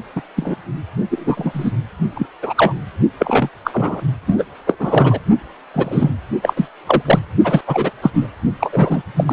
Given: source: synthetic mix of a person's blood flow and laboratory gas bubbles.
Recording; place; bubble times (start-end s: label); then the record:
Doppler ultrasound of blood flow; precordium
0.16-0.21 s: bubbles
0.36-0.56 s: bubbles
1.10-1.71 s: bubbles
2.14-2.26 s: bubbles
2.42-2.53 s: bubbles
2.56-2.73 s: bubbles
3.19-3.49 s: bubbles
3.64-4.01 s: bubbles
4.26-4.45 s: bubbles
4.67-5.20 s: bubbles
5.74-6.12 s: bubbles
6.42-6.54 s: bubbles
6.56-6.68 s: bubbles
6.86-7.02 s: bubbles
7.05-7.20 s: bubbles
7.43-7.61 s: bubbles
7.67-7.91 s: bubbles
8.02-8.11 s: bubbles
8.14-8.27 s: bubbles
8.60-8.70 s: bubbles
8.72-9.02 s: bubbles
9.16-9.24 s: bubbles
9.27-9.33 s: bubbles
From the record:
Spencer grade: 3 (all of the cardiac periods contain showers or single bubble signals, but not dominating or overriding the cardiac motion signals); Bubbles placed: only in the low amplitude regions of the cardiac cycle